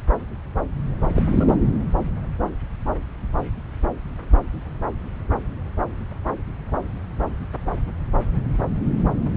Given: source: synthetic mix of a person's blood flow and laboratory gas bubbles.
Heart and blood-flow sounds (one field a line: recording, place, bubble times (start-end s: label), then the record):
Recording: Doppler ultrasound of blood flow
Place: subclavian vein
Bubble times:
1.00-1.23 s: bubbles
1.30-1.54 s: bubbles
From the record:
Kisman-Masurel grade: 112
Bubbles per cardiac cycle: 1 to 2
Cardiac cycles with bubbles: 1 to 10%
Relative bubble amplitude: moderate (0.250 to 0.450)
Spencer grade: 1 (occasional bubble signal discernible with the cardiac motion signal, with majority of cardiac periods free of bubbles)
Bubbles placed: anywhere in the cardiac cycle